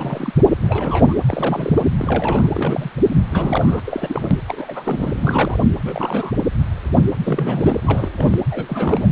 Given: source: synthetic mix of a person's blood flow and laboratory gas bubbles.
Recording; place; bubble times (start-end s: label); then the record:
Doppler ultrasound of blood flow; precordium
0.00-0.33 s: bubbles
0.62-1.14 s: bubbles
1.28-1.82 s: bubbles
1.99-2.47 s: bubbles
2.54-2.90 s: bubbles
3.31-3.80 s: bubbles
3.85-4.36 s: bubbles
4.47-5.12 s: bubbles
5.14-5.59 s: bubbles
5.84-6.34 s: bubbles
7.24-8.10 s: bubbles
8.17-8.43 s: bubbles
8.50-9.07 s: bubbles
From the record:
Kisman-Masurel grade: 332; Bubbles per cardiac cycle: rolling drumbeat, 9 or more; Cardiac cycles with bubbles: 50 to 99%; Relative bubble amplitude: moderate (0.250 to 0.450); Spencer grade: 3 (all of the cardiac periods contain showers or single bubble signals, but not dominating or overriding the cardiac motion signals); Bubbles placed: anywhere in the cardiac cycle